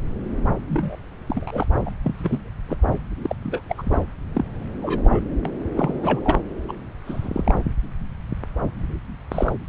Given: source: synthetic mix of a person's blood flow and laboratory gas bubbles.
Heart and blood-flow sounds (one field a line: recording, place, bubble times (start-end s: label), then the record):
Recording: Doppler ultrasound of blood flow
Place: subclavian vein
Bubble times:
0.68-0.96 s: bubbles
1.29-1.67 s: bubbles
1.86-1.90 s: bubbles
2.04-2.15 s: bubbles
2.19-2.49 s: bubbles
2.69-2.76 s: bubbles
3.21-3.35 s: bubbles
3.44-3.62 s: bubbles
3.69-3.75 s: bubbles
3.77-3.98 s: bubbles
4.33-4.45 s: bubbles
4.82-5.20 s: bubbles
5.45-5.52 s: bubbles
5.77-6.21 s: bubbles
6.24-6.38 s: bubbles
6.68-6.73 s: bubbles
7.06-7.54 s: bubbles
9.31-9.53 s: bubbles
From the record:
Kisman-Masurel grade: 232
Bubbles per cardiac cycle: several, 3 to 8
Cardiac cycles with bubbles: 50 to 99%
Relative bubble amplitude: moderate (0.250 to 0.450)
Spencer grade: 3 (all of the cardiac periods contain showers or single bubble signals, but not dominating or overriding the cardiac motion signals)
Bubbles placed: anywhere in the cardiac cycle